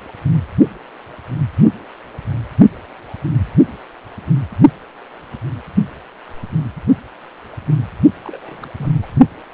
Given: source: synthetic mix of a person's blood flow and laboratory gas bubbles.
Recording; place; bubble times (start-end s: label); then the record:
Doppler ultrasound of blood flow; precordium
8.24-8.68 s: bubbles
8.78-8.89 s: bubbles
9.02-9.06 s: bubbles
From the record:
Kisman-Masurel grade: 211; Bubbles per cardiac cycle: several, 3 to 8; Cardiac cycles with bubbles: 1 to 10%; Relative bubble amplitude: barely perceptible (0.100 to 0.250); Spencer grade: 1 (occasional bubble signal discernible with the cardiac motion signal, with majority of cardiac periods free of bubbles); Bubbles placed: only in the low amplitude regions of the cardiac cycle